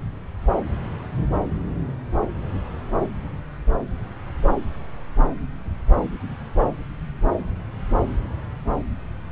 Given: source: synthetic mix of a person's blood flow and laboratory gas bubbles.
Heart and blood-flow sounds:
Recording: Doppler ultrasound of blood flow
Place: subclavian vein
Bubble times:
no bubbles
From the record:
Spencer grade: 0 (complete lack of bubble signals)

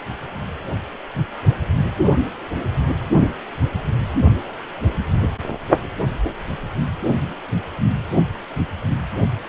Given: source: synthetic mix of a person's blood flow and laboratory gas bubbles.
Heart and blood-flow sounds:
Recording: Doppler ultrasound of blood flow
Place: precordium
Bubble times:
no bubbles
From the record:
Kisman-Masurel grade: 000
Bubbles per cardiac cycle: 0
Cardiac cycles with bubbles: 0%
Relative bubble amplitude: no bubbles discernible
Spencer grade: 0 (complete lack of bubble signals)

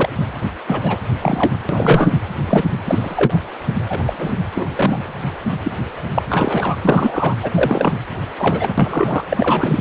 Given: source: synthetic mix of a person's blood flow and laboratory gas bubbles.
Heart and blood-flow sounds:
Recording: Doppler ultrasound of blood flow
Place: precordium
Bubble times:
0.00-0.09 s: bubbles
0.68-0.98 s: bubbles
1.20-1.52 s: bubbles
1.69-2.19 s: bubbles
2.47-2.65 s: bubbles
2.85-3.39 s: bubbles
3.88-4.40 s: bubbles
4.55-5.14 s: bubbles
5.64-5.72 s: bubbles
6.14-6.23 s: bubbles
6.30-6.76 s: bubbles
6.82-7.35 s: bubbles
7.42-7.51 s: bubbles
7.56-7.98 s: bubbles
8.38-8.74 s: bubbles
8.78-9.24 s: bubbles
9.29-9.81 s: bubbles
From the record:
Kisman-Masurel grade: 243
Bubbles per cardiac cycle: several, 3 to 8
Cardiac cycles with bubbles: 100%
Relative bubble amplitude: loud (0.450 to 0.775)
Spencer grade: 3 (all of the cardiac periods contain showers or single bubble signals, but not dominating or overriding the cardiac motion signals)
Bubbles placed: anywhere in the cardiac cycle

